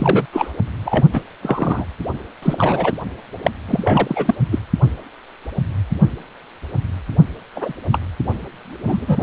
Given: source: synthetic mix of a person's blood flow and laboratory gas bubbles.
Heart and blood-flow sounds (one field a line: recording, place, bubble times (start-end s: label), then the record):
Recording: Doppler ultrasound of blood flow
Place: precordium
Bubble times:
0.00-0.26 s: bubbles
0.32-0.51 s: bubbles
0.85-1.08 s: bubbles
1.13-1.21 s: bubbles
1.42-1.85 s: bubbles
2.42-2.93 s: bubbles
3.44-3.50 s: bubbles
3.68-3.80 s: bubbles
3.82-4.35 s: bubbles
4.50-4.59 s: bubbles
7.55-7.73 s: bubbles
7.91-7.98 s: bubbles
8.81-9.23 s: bubbles
From the record:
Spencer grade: 3 (all of the cardiac periods contain showers or single bubble signals, but not dominating or overriding the cardiac motion signals)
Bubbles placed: anywhere in the cardiac cycle